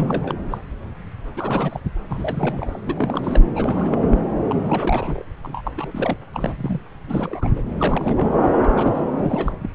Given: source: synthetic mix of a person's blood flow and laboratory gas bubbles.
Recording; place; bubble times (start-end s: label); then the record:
Doppler ultrasound of blood flow; subclavian vein
0.00-0.34 s: bubbles
0.50-0.58 s: bubbles
1.36-1.80 s: bubbles
2.09-2.78 s: bubbles
2.87-3.21 s: bubbles
3.23-3.40 s: bubbles
3.55-4.17 s: bubbles
4.48-5.25 s: bubbles
5.43-5.61 s: bubbles
5.64-5.71 s: bubbles
5.75-6.17 s: bubbles
6.33-6.79 s: bubbles
7.07-7.48 s: bubbles
7.55-7.62 s: bubbles
7.79-8.28 s: bubbles
8.42-8.70 s: bubbles
8.74-9.03 s: bubbles
9.14-9.70 s: bubbles
From the record:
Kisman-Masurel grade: 332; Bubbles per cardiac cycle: rolling drumbeat, 9 or more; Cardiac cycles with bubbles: 50 to 99%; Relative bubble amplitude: moderate (0.250 to 0.450); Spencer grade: 3 (all of the cardiac periods contain showers or single bubble signals, but not dominating or overriding the cardiac motion signals); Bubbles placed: anywhere in the cardiac cycle